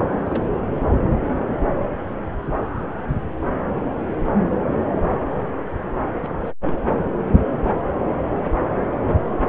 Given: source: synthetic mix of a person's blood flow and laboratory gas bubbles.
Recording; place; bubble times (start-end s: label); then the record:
Doppler ultrasound of blood flow; subclavian vein
0.22-0.43 s: bubbles
0.53-0.60 s: bubbles
6.24-6.28 s: bubbles
6.44-6.51 s: bubbles
6.63-6.83 s: bubbles
From the record:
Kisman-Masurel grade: 221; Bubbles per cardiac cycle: several, 3 to 8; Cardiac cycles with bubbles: 10 to 50%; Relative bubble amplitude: barely perceptible (0.100 to 0.250); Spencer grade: 2 (many but less than half of the cardiac periods contain bubble signals, singularly or in groups); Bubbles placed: anywhere in the cardiac cycle